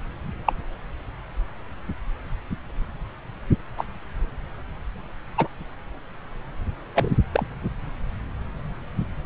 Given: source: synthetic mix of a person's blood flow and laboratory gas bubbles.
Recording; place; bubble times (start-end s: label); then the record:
Doppler ultrasound of blood flow; subclavian vein
0.45-0.53 s: bubbles
3.77-3.85 s: bubbles
5.37-5.47 s: bubbles
6.94-7.14 s: bubbles
7.32-7.46 s: bubbles
From the record:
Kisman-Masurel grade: 122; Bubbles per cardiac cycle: 1 to 2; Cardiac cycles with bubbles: 10 to 50%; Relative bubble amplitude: moderate (0.250 to 0.450); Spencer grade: 2 (many but less than half of the cardiac periods contain bubble signals, singularly or in groups); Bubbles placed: anywhere in the cardiac cycle